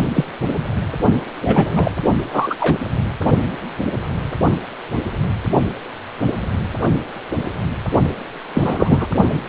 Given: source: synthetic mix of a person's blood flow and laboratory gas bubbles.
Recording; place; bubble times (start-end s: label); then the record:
Doppler ultrasound of blood flow; precordium
0.14-0.24 s: bubbles
1.41-1.91 s: bubbles
2.32-2.55 s: bubbles
2.60-2.78 s: bubbles
8.53-9.07 s: bubbles
From the record:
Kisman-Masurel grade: 223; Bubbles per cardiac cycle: several, 3 to 8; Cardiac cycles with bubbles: 10 to 50%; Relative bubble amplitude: loud (0.450 to 0.775); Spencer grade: 2 (many but less than half of the cardiac periods contain bubble signals, singularly or in groups); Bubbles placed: only in the low amplitude regions of the cardiac cycle